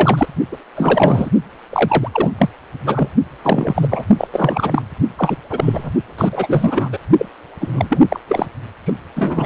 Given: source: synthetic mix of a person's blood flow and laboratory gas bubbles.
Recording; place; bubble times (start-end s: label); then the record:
Doppler ultrasound of blood flow; precordium
0.00-0.27 s: bubbles
0.52-0.57 s: bubbles
0.76-1.31 s: bubbles
1.69-2.08 s: bubbles
2.12-2.32 s: bubbles
2.38-2.50 s: bubbles
2.86-3.08 s: bubbles
3.43-4.04 s: bubbles
4.17-4.28 s: bubbles
4.32-4.82 s: bubbles
5.17-5.37 s: bubbles
5.50-5.92 s: bubbles
6.17-6.29 s: bubbles
6.32-6.90 s: bubbles
6.92-6.98 s: bubbles
7.17-7.26 s: bubbles
7.60-8.00 s: bubbles
8.09-8.20 s: bubbles
8.27-8.46 s: bubbles
8.85-8.93 s: bubbles
9.15-9.46 s: bubbles
From the record:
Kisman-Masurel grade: 333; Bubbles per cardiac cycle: rolling drumbeat, 9 or more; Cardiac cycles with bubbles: 50 to 99%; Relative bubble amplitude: loud (0.450 to 0.775); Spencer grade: 3 (all of the cardiac periods contain showers or single bubble signals, but not dominating or overriding the cardiac motion signals); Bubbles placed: only in the low amplitude regions of the cardiac cycle